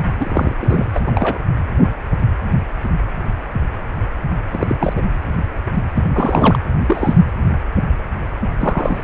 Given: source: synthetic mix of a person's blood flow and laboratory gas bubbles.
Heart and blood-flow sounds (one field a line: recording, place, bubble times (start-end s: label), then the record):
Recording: Doppler ultrasound of blood flow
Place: precordium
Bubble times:
0.20-0.55 s: bubbles
0.60-0.86 s: bubbles
0.93-0.99 s: bubbles
1.06-1.38 s: bubbles
4.51-4.75 s: bubbles
4.79-5.02 s: bubbles
5.95-6.04 s: bubbles
6.12-6.59 s: bubbles
6.86-7.17 s: bubbles
8.59-9.04 s: bubbles
From the record:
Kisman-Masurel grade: 232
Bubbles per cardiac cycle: several, 3 to 8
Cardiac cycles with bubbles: 50 to 99%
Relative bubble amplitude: moderate (0.250 to 0.450)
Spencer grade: 3 (all of the cardiac periods contain showers or single bubble signals, but not dominating or overriding the cardiac motion signals)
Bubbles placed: anywhere in the cardiac cycle